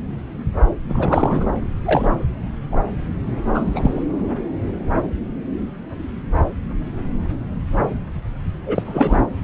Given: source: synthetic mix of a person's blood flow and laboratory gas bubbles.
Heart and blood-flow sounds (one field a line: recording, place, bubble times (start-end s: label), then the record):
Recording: Doppler ultrasound of blood flow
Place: subclavian vein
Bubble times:
0.88-1.47 s: bubbles
1.85-2.08 s: bubbles
2.71-2.77 s: bubbles
3.00-3.02 s: bubbles
3.54-4.03 s: bubbles
8.66-9.23 s: bubbles
From the record:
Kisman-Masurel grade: 222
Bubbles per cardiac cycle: several, 3 to 8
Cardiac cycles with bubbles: 10 to 50%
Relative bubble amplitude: moderate (0.250 to 0.450)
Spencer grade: 2 (many but less than half of the cardiac periods contain bubble signals, singularly or in groups)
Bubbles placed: anywhere in the cardiac cycle